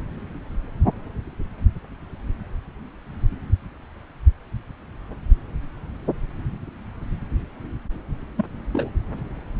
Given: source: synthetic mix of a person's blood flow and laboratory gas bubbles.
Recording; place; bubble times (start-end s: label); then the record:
Doppler ultrasound of blood flow; subclavian vein
8.36-8.45 s: bubbles
8.74-8.90 s: bubbles
From the record:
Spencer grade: 1 (occasional bubble signal discernible with the cardiac motion signal, with majority of cardiac periods free of bubbles); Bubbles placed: anywhere in the cardiac cycle